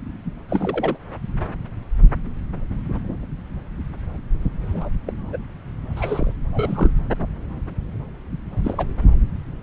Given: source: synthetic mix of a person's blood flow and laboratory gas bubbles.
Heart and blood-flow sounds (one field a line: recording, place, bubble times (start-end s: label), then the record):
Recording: Doppler ultrasound of blood flow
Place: subclavian vein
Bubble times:
0.49-0.97 s: bubbles
4.72-4.89 s: bubbles
5.06-5.12 s: bubbles
5.32-5.38 s: bubbles
5.96-6.33 s: bubbles
6.52-6.91 s: bubbles
8.57-8.86 s: bubbles
From the record:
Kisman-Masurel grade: 221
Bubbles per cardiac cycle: several, 3 to 8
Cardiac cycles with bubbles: 10 to 50%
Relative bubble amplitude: barely perceptible (0.100 to 0.250)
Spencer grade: 2 (many but less than half of the cardiac periods contain bubble signals, singularly or in groups)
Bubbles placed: anywhere in the cardiac cycle